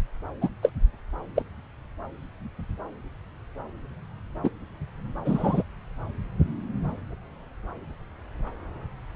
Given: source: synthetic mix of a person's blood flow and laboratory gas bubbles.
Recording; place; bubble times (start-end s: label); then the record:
Doppler ultrasound of blood flow; subclavian vein
0.41-0.49 s: bubbles
0.62-0.72 s: bubbles
1.35-1.43 s: bubbles
4.43-4.49 s: bubbles
5.25-5.62 s: bubbles
From the record:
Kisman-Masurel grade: 122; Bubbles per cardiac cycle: 1 to 2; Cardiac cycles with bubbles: 10 to 50%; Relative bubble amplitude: moderate (0.250 to 0.450); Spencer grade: 2 (many but less than half of the cardiac periods contain bubble signals, singularly or in groups); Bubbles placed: anywhere in the cardiac cycle